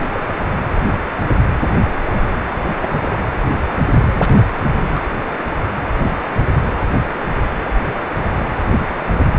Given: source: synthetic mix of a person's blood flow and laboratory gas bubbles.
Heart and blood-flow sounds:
Doppler ultrasound of blood flow; precordium
0.00-0.07 s: bubbles
0.13-0.24 s: bubbles
2.07-2.21 s: bubbles
2.46-3.19 s: bubbles
3.99-4.08 s: bubbles
4.12-4.49 s: bubbles
4.74-5.07 s: bubbles
From the record:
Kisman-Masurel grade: 221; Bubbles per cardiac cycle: several, 3 to 8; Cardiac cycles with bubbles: 10 to 50%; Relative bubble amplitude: barely perceptible (0.100 to 0.250); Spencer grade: 2 (many but less than half of the cardiac periods contain bubble signals, singularly or in groups); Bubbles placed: anywhere in the cardiac cycle

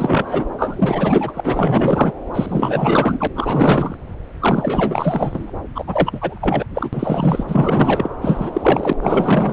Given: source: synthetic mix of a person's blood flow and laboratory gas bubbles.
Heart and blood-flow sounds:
Doppler ultrasound of blood flow; subclavian vein
0.00-0.45 s: bubbles
0.57-1.40 s: bubbles
1.44-2.13 s: bubbles
2.33-3.27 s: bubbles
3.35-3.96 s: bubbles
4.40-5.52 s: bubbles
5.75-6.66 s: bubbles
6.74-6.90 s: bubbles
6.93-7.45 s: bubbles
7.48-8.09 s: bubbles
8.21-8.93 s: bubbles
9.02-9.53 s: bubbles
From the record:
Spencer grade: 4 (maximum detectable bubble signal sounding continuously throughout systole and diastole of every cardiac period, and overriding the amplitude of the normal cardiac signals); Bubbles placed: anywhere in the cardiac cycle

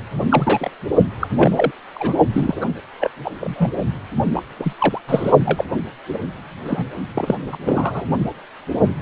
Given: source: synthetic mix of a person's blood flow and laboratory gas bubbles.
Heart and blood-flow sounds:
Doppler ultrasound of blood flow; precordium
0.20-0.27 s: bubbles
0.29-0.71 s: bubbles
1.20-1.27 s: bubbles
1.35-1.72 s: bubbles
1.95-2.15 s: bubbles
2.33-2.67 s: bubbles
3.00-3.11 s: bubbles
3.24-3.31 s: bubbles
3.40-3.72 s: bubbles
4.35-4.42 s: bubbles
4.59-4.73 s: bubbles
4.79-5.00 s: bubbles
5.08-5.31 s: bubbles
5.45-5.64 s: bubbles
6.08-6.19 s: bubbles
6.65-6.88 s: bubbles
7.14-7.35 s: bubbles
7.52-7.57 s: bubbles
7.65-8.07 s: bubbles
From the record:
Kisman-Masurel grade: 242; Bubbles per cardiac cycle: several, 3 to 8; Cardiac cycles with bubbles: 100%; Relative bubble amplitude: moderate (0.250 to 0.450); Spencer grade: 3 (all of the cardiac periods contain showers or single bubble signals, but not dominating or overriding the cardiac motion signals); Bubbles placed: only in the low amplitude regions of the cardiac cycle

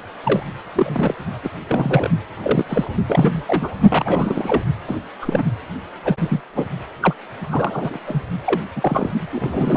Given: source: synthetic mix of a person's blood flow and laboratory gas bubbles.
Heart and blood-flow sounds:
Doppler ultrasound of blood flow; precordium
0.24-0.43 s: bubbles
0.75-1.15 s: bubbles
1.43-1.49 s: bubbles
1.68-2.10 s: bubbles
2.42-2.65 s: bubbles
2.69-2.90 s: bubbles
3.08-3.43 s: bubbles
3.46-3.69 s: bubbles
3.88-4.63 s: bubbles
4.88-4.97 s: bubbles
5.21-5.43 s: bubbles
6.04-6.41 s: bubbles
6.54-6.65 s: bubbles
7.01-7.14 s: bubbles
7.50-7.99 s: bubbles
8.07-8.23 s: bubbles
8.45-8.62 s: bubbles
8.76-9.10 s: bubbles
9.21-9.77 s: bubbles
From the record:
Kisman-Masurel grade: 242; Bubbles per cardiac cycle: several, 3 to 8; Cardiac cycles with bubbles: 100%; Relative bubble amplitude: moderate (0.250 to 0.450); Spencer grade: 3 (all of the cardiac periods contain showers or single bubble signals, but not dominating or overriding the cardiac motion signals); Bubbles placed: only in the low amplitude regions of the cardiac cycle

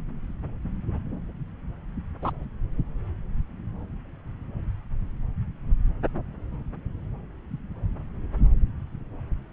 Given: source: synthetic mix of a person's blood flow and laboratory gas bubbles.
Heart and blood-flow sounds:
Doppler ultrasound of blood flow; subclavian vein
2.22-2.31 s: bubbles
From the record:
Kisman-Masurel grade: 112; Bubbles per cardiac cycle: 1 to 2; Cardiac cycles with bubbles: 1 to 10%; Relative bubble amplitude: moderate (0.250 to 0.450); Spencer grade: 1 (occasional bubble signal discernible with the cardiac motion signal, with majority of cardiac periods free of bubbles); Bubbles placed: anywhere in the cardiac cycle

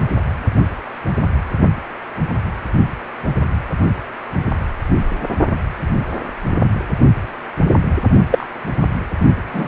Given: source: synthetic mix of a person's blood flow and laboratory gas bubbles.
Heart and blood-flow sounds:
Doppler ultrasound of blood flow; precordium
8.31-8.45 s: bubbles
9.52-9.68 s: bubbles
From the record:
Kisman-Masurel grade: 123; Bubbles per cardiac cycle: 1 to 2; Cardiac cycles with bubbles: 10 to 50%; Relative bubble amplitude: loud (0.450 to 0.775); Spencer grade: 2 (many but less than half of the cardiac periods contain bubble signals, singularly or in groups); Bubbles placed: only in the low amplitude regions of the cardiac cycle

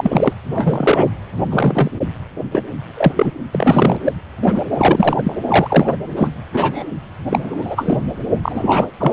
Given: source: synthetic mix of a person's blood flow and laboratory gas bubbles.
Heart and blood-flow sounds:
Doppler ultrasound of blood flow; precordium
0.00-0.33 s: bubbles
0.54-1.06 s: bubbles
1.50-1.91 s: bubbles
2.51-2.62 s: bubbles
2.96-3.12 s: bubbles
3.15-3.32 s: bubbles
3.54-3.98 s: bubbles
4.05-4.12 s: bubbles
4.43-4.66 s: bubbles
4.78-5.36 s: bubbles
5.47-5.96 s: bubbles
6.16-6.31 s: bubbles
6.53-6.85 s: bubbles
7.29-7.98 s: bubbles
8.43-8.86 s: bubbles
9.00-9.12 s: bubbles
From the record:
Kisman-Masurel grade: 243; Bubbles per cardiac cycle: several, 3 to 8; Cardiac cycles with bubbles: 100%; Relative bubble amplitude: loud (0.450 to 0.775); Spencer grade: 3 (all of the cardiac periods contain showers or single bubble signals, but not dominating or overriding the cardiac motion signals); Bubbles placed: anywhere in the cardiac cycle

